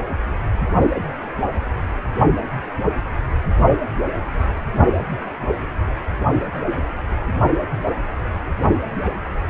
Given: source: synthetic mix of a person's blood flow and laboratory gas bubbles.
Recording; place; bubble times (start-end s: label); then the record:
Doppler ultrasound of blood flow; precordium
no bubbles
From the record:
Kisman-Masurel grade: 000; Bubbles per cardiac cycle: 0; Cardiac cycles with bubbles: 0%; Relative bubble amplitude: no bubbles discernible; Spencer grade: 0 (complete lack of bubble signals)